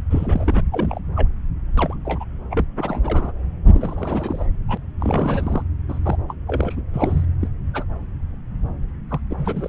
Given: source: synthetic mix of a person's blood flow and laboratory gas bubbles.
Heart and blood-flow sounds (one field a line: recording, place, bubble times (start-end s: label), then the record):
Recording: Doppler ultrasound of blood flow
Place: subclavian vein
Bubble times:
0.10-0.63 s: bubbles
0.71-0.99 s: bubbles
1.16-1.27 s: bubbles
1.77-1.97 s: bubbles
2.05-2.25 s: bubbles
2.51-2.65 s: bubbles
2.77-3.32 s: bubbles
3.64-4.46 s: bubbles
4.68-4.78 s: bubbles
5.00-5.62 s: bubbles
5.88-5.98 s: bubbles
6.03-6.17 s: bubbles
6.28-6.35 s: bubbles
6.47-6.82 s: bubbles
6.92-7.25 s: bubbles
7.41-7.48 s: bubbles
7.74-7.85 s: bubbles
9.10-9.20 s: bubbles
9.30-9.69 s: bubbles
From the record:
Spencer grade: 3 (all of the cardiac periods contain showers or single bubble signals, but not dominating or overriding the cardiac motion signals)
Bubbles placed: anywhere in the cardiac cycle